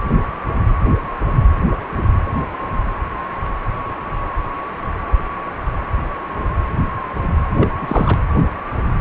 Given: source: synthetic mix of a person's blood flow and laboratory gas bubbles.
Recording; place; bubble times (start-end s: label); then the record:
Doppler ultrasound of blood flow; precordium
7.57-7.67 s: bubbles
7.81-8.19 s: bubbles
From the record:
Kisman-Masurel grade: 212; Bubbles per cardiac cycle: several, 3 to 8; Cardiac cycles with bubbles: 1 to 10%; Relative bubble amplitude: moderate (0.250 to 0.450); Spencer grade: 1 (occasional bubble signal discernible with the cardiac motion signal, with majority of cardiac periods free of bubbles); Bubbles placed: anywhere in the cardiac cycle